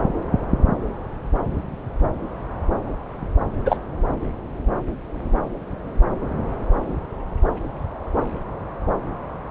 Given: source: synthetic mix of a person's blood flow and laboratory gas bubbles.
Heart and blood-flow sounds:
Doppler ultrasound of blood flow; subclavian vein
3.65-3.77 s: bubbles
From the record:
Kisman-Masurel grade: 113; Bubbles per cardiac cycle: 1 to 2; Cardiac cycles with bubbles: 1 to 10%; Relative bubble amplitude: loud (0.450 to 0.775); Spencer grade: 1 (occasional bubble signal discernible with the cardiac motion signal, with majority of cardiac periods free of bubbles); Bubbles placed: anywhere in the cardiac cycle

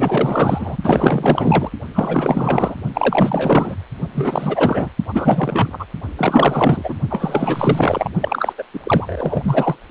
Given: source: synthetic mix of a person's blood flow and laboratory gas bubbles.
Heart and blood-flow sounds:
Doppler ultrasound of blood flow; precordium
0.00-0.77 s: bubbles
0.83-1.71 s: bubbles
1.95-2.75 s: bubbles
2.94-3.76 s: bubbles
4.15-4.89 s: bubbles
5.08-5.86 s: bubbles
6.16-6.95 s: bubbles
7.10-8.10 s: bubbles
8.21-8.53 s: bubbles
8.58-8.63 s: bubbles
8.73-8.79 s: bubbles
8.84-9.76 s: bubbles
From the record:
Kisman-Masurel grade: 444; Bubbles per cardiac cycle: continuous sound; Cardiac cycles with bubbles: 100%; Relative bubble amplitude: maximal (0.775 to 0.999); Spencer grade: 4 (maximum detectable bubble signal sounding continuously throughout systole and diastole of every cardiac period, and overriding the amplitude of the normal cardiac signals); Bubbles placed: only in the low amplitude regions of the cardiac cycle

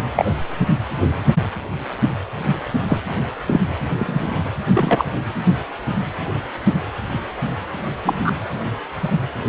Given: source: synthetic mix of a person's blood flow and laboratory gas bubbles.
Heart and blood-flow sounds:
Doppler ultrasound of blood flow; precordium
0.15-0.33 s: bubbles
2.88-3.00 s: bubbles
3.46-3.61 s: bubbles
3.96-4.43 s: bubbles
4.74-5.04 s: bubbles
8.04-8.32 s: bubbles
From the record:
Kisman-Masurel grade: 123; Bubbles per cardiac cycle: 1 to 2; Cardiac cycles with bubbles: 10 to 50%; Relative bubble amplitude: loud (0.450 to 0.775); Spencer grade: 2 (many but less than half of the cardiac periods contain bubble signals, singularly or in groups); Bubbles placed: anywhere in the cardiac cycle

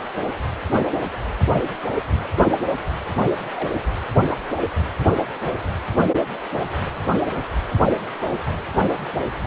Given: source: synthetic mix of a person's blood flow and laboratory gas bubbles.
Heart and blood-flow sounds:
Doppler ultrasound of blood flow; precordium
3.21-3.33 s: bubbles
3.56-3.75 s: bubbles
From the record:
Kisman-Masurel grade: 111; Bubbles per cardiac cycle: 1 to 2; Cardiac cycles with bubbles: 1 to 10%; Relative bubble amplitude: barely perceptible (0.100 to 0.250); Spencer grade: 1 (occasional bubble signal discernible with the cardiac motion signal, with majority of cardiac periods free of bubbles); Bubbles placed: anywhere in the cardiac cycle

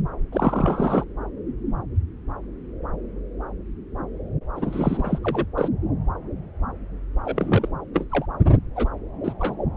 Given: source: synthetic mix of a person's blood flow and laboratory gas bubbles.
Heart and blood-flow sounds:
Doppler ultrasound of blood flow; subclavian vein
0.32-1.04 s: bubbles
4.55-5.18 s: bubbles
5.23-5.46 s: bubbles
5.58-5.68 s: bubbles
7.25-7.68 s: bubbles
7.94-8.07 s: bubbles
8.10-8.26 s: bubbles
8.76-8.88 s: bubbles
9.24-9.33 s: bubbles
9.39-9.56 s: bubbles
From the record:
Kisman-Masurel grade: 232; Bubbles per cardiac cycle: several, 3 to 8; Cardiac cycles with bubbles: 50 to 99%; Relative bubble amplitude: moderate (0.250 to 0.450); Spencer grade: 3 (all of the cardiac periods contain showers or single bubble signals, but not dominating or overriding the cardiac motion signals); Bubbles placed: anywhere in the cardiac cycle

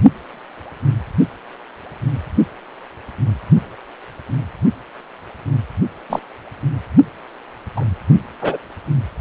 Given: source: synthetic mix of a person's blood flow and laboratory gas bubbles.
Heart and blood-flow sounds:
Doppler ultrasound of blood flow; precordium
6.09-6.19 s: bubbles
7.76-7.85 s: bubbles
8.41-8.57 s: bubbles
From the record:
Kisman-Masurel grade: 123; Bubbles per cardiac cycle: 1 to 2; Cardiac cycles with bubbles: 10 to 50%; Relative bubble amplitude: loud (0.450 to 0.775); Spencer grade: 2 (many but less than half of the cardiac periods contain bubble signals, singularly or in groups); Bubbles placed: only in the low amplitude regions of the cardiac cycle

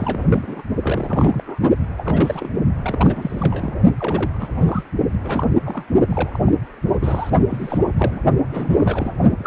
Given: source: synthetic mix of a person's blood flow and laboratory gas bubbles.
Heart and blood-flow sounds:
Doppler ultrasound of blood flow; precordium
0.00-0.62 s: bubbles
0.82-1.43 s: bubbles
1.47-1.58 s: bubbles
1.98-2.49 s: bubbles
2.83-3.73 s: bubbles
3.99-4.31 s: bubbles
4.39-4.83 s: bubbles
5.24-5.47 s: bubbles
5.65-5.83 s: bubbles
6.07-6.52 s: bubbles
6.93-6.98 s: bubbles
7.01-7.30 s: bubbles
7.50-7.82 s: bubbles
7.97-8.21 s: bubbles
8.47-9.13 s: bubbles
9.38-9.47 s: bubbles
From the record:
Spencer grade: 3 (all of the cardiac periods contain showers or single bubble signals, but not dominating or overriding the cardiac motion signals); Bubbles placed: only in the low amplitude regions of the cardiac cycle

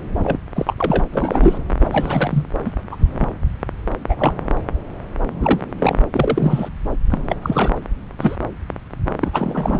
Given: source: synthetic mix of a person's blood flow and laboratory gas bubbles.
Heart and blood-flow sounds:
Doppler ultrasound of blood flow; subclavian vein
0.18-0.38 s: bubbles
0.56-0.74 s: bubbles
0.78-1.04 s: bubbles
1.12-1.58 s: bubbles
1.80-2.48 s: bubbles
2.65-2.71 s: bubbles
2.91-2.96 s: bubbles
3.12-3.28 s: bubbles
4.08-4.34 s: bubbles
5.41-5.60 s: bubbles
5.79-5.97 s: bubbles
6.12-6.69 s: bubbles
7.09-7.19 s: bubbles
7.29-7.36 s: bubbles
7.42-7.78 s: bubbles
8.20-8.36 s: bubbles
9.20-9.79 s: bubbles
From the record:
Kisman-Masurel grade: 233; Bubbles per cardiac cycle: several, 3 to 8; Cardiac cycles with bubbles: 50 to 99%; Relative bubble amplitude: loud (0.450 to 0.775); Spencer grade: 3 (all of the cardiac periods contain showers or single bubble signals, but not dominating or overriding the cardiac motion signals); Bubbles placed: anywhere in the cardiac cycle

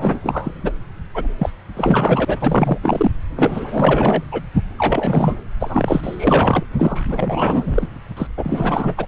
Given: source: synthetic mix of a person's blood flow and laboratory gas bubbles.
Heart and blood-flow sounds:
Doppler ultrasound of blood flow; subclavian vein
0.00-0.52 s: bubbles
0.63-0.72 s: bubbles
1.14-1.28 s: bubbles
1.39-1.49 s: bubbles
1.77-2.79 s: bubbles
2.83-3.10 s: bubbles
3.36-4.23 s: bubbles
4.31-4.41 s: bubbles
4.54-4.63 s: bubbles
4.77-5.37 s: bubbles
5.60-6.66 s: bubbles
6.79-7.02 s: bubbles
7.08-7.87 s: bubbles
8.16-8.27 s: bubbles
8.37-8.95 s: bubbles
8.97-9.06 s: bubbles
From the record:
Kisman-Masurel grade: 444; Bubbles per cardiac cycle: continuous sound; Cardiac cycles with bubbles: 100%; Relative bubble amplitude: maximal (0.775 to 0.999); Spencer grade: 4 (maximum detectable bubble signal sounding continuously throughout systole and diastole of every cardiac period, and overriding the amplitude of the normal cardiac signals); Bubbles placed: anywhere in the cardiac cycle

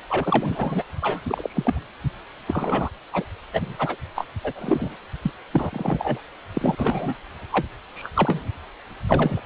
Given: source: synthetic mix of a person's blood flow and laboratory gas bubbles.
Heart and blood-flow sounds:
Doppler ultrasound of blood flow; precordium
0.10-0.83 s: bubbles
1.02-1.21 s: bubbles
1.27-1.81 s: bubbles
2.48-2.90 s: bubbles
3.12-3.24 s: bubbles
3.53-3.96 s: bubbles
4.15-4.25 s: bubbles
4.43-4.52 s: bubbles
4.55-4.96 s: bubbles
5.22-5.31 s: bubbles
5.53-6.21 s: bubbles
6.53-7.15 s: bubbles
7.52-7.67 s: bubbles
7.94-8.09 s: bubbles
8.14-8.49 s: bubbles
9.09-9.41 s: bubbles
From the record:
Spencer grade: 3 (all of the cardiac periods contain showers or single bubble signals, but not dominating or overriding the cardiac motion signals); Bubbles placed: anywhere in the cardiac cycle

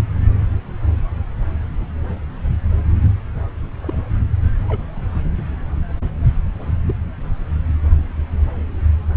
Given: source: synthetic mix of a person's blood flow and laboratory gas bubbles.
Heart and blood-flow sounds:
Doppler ultrasound of blood flow; subclavian vein
3.82-3.97 s: bubbles
4.68-4.85 s: bubbles
6.88-6.94 s: bubbles
From the record:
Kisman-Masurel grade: 121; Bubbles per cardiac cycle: 1 to 2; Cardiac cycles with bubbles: 10 to 50%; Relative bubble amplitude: barely perceptible (0.100 to 0.250); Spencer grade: 2 (many but less than half of the cardiac periods contain bubble signals, singularly or in groups); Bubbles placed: anywhere in the cardiac cycle

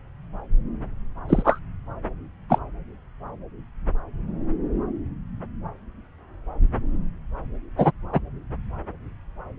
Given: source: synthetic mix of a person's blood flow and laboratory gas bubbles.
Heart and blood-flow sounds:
Doppler ultrasound of blood flow; subclavian vein
1.28-1.59 s: bubbles
2.49-2.59 s: bubbles
7.77-7.91 s: bubbles
8.12-8.20 s: bubbles
From the record:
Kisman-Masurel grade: 123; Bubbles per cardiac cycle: 1 to 2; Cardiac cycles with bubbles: 10 to 50%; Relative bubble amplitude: loud (0.450 to 0.775); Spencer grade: 2 (many but less than half of the cardiac periods contain bubble signals, singularly or in groups); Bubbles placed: anywhere in the cardiac cycle

